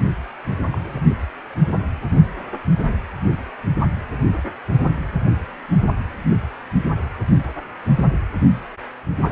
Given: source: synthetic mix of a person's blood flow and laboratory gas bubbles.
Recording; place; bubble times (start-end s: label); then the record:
Doppler ultrasound of blood flow; precordium
0.71-1.02 s: bubbles
From the record:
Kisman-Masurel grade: 111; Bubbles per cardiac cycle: 1 to 2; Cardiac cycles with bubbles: 1 to 10%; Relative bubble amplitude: barely perceptible (0.100 to 0.250); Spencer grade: 1 (occasional bubble signal discernible with the cardiac motion signal, with majority of cardiac periods free of bubbles); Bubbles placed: only in the low amplitude regions of the cardiac cycle